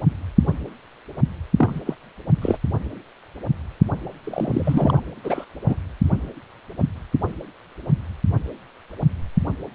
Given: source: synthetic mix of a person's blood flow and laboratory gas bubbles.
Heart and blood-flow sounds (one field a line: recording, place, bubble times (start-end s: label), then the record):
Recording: Doppler ultrasound of blood flow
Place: precordium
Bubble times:
1.56-1.81 s: bubbles
1.85-1.95 s: bubbles
2.41-2.58 s: bubbles
4.23-5.01 s: bubbles
5.23-5.44 s: bubbles
5.67-5.76 s: bubbles
From the record:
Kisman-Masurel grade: 222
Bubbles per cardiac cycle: several, 3 to 8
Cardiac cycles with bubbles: 10 to 50%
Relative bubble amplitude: moderate (0.250 to 0.450)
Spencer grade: 2 (many but less than half of the cardiac periods contain bubble signals, singularly or in groups)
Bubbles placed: only in the low amplitude regions of the cardiac cycle